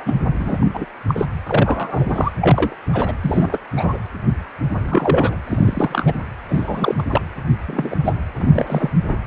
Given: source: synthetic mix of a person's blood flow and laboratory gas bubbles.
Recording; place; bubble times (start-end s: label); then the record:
Doppler ultrasound of blood flow; precordium
0.00-0.15 s: bubbles
0.39-0.57 s: bubbles
0.61-0.85 s: bubbles
1.07-1.25 s: bubbles
1.46-2.31 s: bubbles
2.41-2.75 s: bubbles
2.92-3.13 s: bubbles
3.23-3.58 s: bubbles
3.76-3.98 s: bubbles
4.85-5.36 s: bubbles
5.46-6.14 s: bubbles
6.49-7.03 s: bubbles
7.10-7.21 s: bubbles
7.66-7.96 s: bubbles
8.04-8.13 s: bubbles
8.37-8.90 s: bubbles
9.08-9.17 s: bubbles
From the record:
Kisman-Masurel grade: 242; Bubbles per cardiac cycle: several, 3 to 8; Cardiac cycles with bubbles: 100%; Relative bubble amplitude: moderate (0.250 to 0.450); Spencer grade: 3 (all of the cardiac periods contain showers or single bubble signals, but not dominating or overriding the cardiac motion signals); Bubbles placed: anywhere in the cardiac cycle